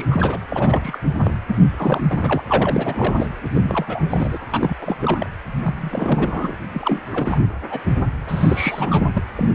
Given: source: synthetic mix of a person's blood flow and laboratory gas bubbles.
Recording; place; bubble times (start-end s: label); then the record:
Doppler ultrasound of blood flow; precordium
0.00-0.06 s: bubbles
0.10-0.39 s: bubbles
0.49-0.98 s: bubbles
1.18-1.33 s: bubbles
1.47-1.60 s: bubbles
1.76-2.42 s: bubbles
2.46-3.27 s: bubbles
3.51-4.04 s: bubbles
4.10-4.40 s: bubbles
4.51-4.76 s: bubbles
4.81-5.29 s: bubbles
5.62-6.57 s: bubbles
6.74-7.00 s: bubbles
7.05-7.41 s: bubbles
7.70-7.81 s: bubbles
8.27-9.07 s: bubbles
9.13-9.23 s: bubbles
9.36-9.50 s: bubbles
From the record:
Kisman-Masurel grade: 342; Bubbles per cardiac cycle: rolling drumbeat, 9 or more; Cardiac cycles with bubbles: 100%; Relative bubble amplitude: moderate (0.250 to 0.450); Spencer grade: 3 (all of the cardiac periods contain showers or single bubble signals, but not dominating or overriding the cardiac motion signals); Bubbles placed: anywhere in the cardiac cycle